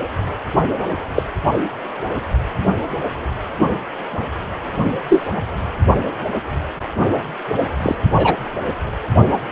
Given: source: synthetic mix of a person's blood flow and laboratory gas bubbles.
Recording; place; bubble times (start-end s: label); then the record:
Doppler ultrasound of blood flow; precordium
1.15-1.23 s: bubbles
4.85-4.92 s: bubbles
5.08-5.27 s: bubbles
7.82-7.95 s: bubbles
8.15-8.37 s: bubbles
From the record:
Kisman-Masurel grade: 123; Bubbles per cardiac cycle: 1 to 2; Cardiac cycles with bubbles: 10 to 50%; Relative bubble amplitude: loud (0.450 to 0.775); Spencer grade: 2 (many but less than half of the cardiac periods contain bubble signals, singularly or in groups); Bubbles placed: anywhere in the cardiac cycle